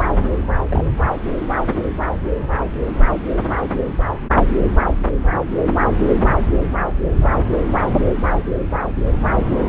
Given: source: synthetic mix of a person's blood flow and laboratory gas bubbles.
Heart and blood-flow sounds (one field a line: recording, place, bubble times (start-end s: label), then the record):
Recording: Doppler ultrasound of blood flow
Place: subclavian vein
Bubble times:
0.00-0.20 s: bubbles
0.69-0.84 s: bubbles
From the record:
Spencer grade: 1 (occasional bubble signal discernible with the cardiac motion signal, with majority of cardiac periods free of bubbles)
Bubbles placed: anywhere in the cardiac cycle